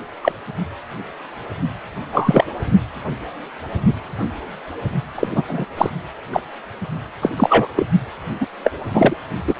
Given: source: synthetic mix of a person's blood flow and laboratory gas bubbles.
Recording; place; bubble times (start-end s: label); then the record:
Doppler ultrasound of blood flow; precordium
0.23-0.32 s: bubbles
2.12-2.44 s: bubbles
5.15-5.27 s: bubbles
5.35-5.43 s: bubbles
5.48-5.65 s: bubbles
5.77-5.90 s: bubbles
6.32-6.41 s: bubbles
7.21-7.29 s: bubbles
7.37-7.68 s: bubbles
7.76-7.86 s: bubbles
8.40-8.46 s: bubbles
8.64-8.71 s: bubbles
8.93-9.16 s: bubbles
9.47-9.55 s: bubbles
From the record:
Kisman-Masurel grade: 233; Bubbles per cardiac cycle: several, 3 to 8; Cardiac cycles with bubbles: 50 to 99%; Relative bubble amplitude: loud (0.450 to 0.775); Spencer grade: 3 (all of the cardiac periods contain showers or single bubble signals, but not dominating or overriding the cardiac motion signals); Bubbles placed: only in the low amplitude regions of the cardiac cycle